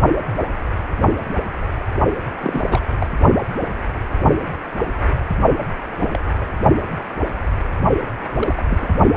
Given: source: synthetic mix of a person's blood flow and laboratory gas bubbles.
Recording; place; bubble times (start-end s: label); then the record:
Doppler ultrasound of blood flow; precordium
2.40-2.62 s: bubbles
2.67-2.86 s: bubbles
3.00-3.08 s: bubbles
5.99-6.20 s: bubbles
6.39-6.47 s: bubbles
8.33-8.62 s: bubbles
8.67-8.78 s: bubbles
8.80-8.94 s: bubbles
From the record:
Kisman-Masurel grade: 222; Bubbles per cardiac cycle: several, 3 to 8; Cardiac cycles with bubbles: 10 to 50%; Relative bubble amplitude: moderate (0.250 to 0.450); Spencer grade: 2 (many but less than half of the cardiac periods contain bubble signals, singularly or in groups); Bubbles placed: only in the low amplitude regions of the cardiac cycle